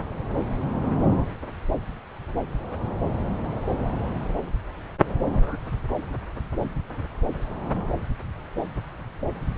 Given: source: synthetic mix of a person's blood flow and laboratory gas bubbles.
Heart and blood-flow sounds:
Doppler ultrasound of blood flow; subclavian vein
5.33-5.60 s: bubbles
From the record:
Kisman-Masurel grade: 111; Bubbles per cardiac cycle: 1 to 2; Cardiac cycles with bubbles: 1 to 10%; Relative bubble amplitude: barely perceptible (0.100 to 0.250); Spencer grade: 1 (occasional bubble signal discernible with the cardiac motion signal, with majority of cardiac periods free of bubbles); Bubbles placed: anywhere in the cardiac cycle

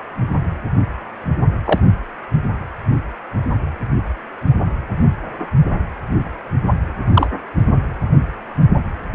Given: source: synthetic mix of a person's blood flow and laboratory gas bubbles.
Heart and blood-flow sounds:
Doppler ultrasound of blood flow; precordium
1.65-1.80 s: bubbles
7.13-7.27 s: bubbles
From the record:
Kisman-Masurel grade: 123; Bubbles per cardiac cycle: 1 to 2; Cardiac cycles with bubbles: 10 to 50%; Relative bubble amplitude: loud (0.450 to 0.775); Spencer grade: 2 (many but less than half of the cardiac periods contain bubble signals, singularly or in groups); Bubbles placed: only in the low amplitude regions of the cardiac cycle

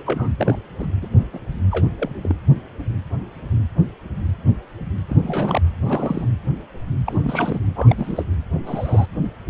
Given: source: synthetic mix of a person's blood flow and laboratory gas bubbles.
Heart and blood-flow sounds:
Doppler ultrasound of blood flow; precordium
0.00-0.03 s: bubbles
0.05-0.30 s: bubbles
0.37-0.58 s: bubbles
0.79-0.88 s: bubbles
1.02-1.07 s: bubbles
1.18-1.25 s: bubbles
1.32-1.39 s: bubbles
1.71-1.86 s: bubbles
1.92-2.35 s: bubbles
5.09-5.60 s: bubbles
5.80-6.26 s: bubbles
7.05-7.59 s: bubbles
7.75-8.23 s: bubbles
8.64-9.06 s: bubbles
From the record:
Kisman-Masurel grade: 232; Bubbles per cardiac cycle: several, 3 to 8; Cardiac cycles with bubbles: 50 to 99%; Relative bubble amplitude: moderate (0.250 to 0.450); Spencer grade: 3 (all of the cardiac periods contain showers or single bubble signals, but not dominating or overriding the cardiac motion signals); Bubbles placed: anywhere in the cardiac cycle

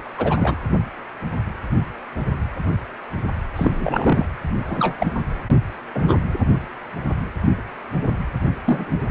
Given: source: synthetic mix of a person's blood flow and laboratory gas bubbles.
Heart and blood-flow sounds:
Doppler ultrasound of blood flow; precordium
0.18-0.56 s: bubbles
3.56-4.25 s: bubbles
4.69-4.96 s: bubbles
4.99-5.12 s: bubbles
5.50-5.59 s: bubbles
5.94-6.19 s: bubbles
8.64-9.05 s: bubbles
From the record:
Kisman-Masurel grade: 233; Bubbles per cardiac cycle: several, 3 to 8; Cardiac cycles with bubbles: 50 to 99%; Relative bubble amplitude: loud (0.450 to 0.775); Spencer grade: 3 (all of the cardiac periods contain showers or single bubble signals, but not dominating or overriding the cardiac motion signals); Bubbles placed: anywhere in the cardiac cycle

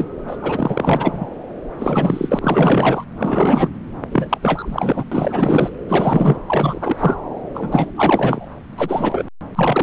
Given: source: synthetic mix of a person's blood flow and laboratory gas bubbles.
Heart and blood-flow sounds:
Doppler ultrasound of blood flow; subclavian vein
0.00-0.05 s: bubbles
0.27-0.37 s: bubbles
0.41-1.26 s: bubbles
1.78-3.04 s: bubbles
3.15-3.69 s: bubbles
4.12-4.38 s: bubbles
4.42-5.71 s: bubbles
5.88-6.37 s: bubbles
6.47-7.16 s: bubbles
7.54-7.91 s: bubbles
7.96-8.47 s: bubbles
8.77-9.24 s: bubbles
9.55-9.83 s: bubbles
From the record:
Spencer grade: 4 (maximum detectable bubble signal sounding continuously throughout systole and diastole of every cardiac period, and overriding the amplitude of the normal cardiac signals); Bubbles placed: anywhere in the cardiac cycle

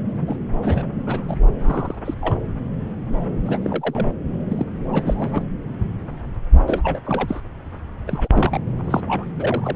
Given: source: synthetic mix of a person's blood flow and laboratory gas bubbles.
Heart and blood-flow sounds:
Doppler ultrasound of blood flow; subclavian vein
0.27-0.36 s: bubbles
0.60-0.87 s: bubbles
1.06-1.36 s: bubbles
1.64-1.95 s: bubbles
2.04-2.14 s: bubbles
2.21-2.35 s: bubbles
3.45-3.58 s: bubbles
3.63-4.06 s: bubbles
4.49-4.65 s: bubbles
4.92-5.45 s: bubbles
6.67-7.00 s: bubbles
7.05-7.41 s: bubbles
8.06-8.28 s: bubbles
8.32-8.60 s: bubbles
8.83-9.03 s: bubbles
9.07-9.24 s: bubbles
9.39-9.76 s: bubbles
From the record:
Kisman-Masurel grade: 232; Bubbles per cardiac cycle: several, 3 to 8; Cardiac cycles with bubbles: 50 to 99%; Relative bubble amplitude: moderate (0.250 to 0.450); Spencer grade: 3 (all of the cardiac periods contain showers or single bubble signals, but not dominating or overriding the cardiac motion signals); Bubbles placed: anywhere in the cardiac cycle

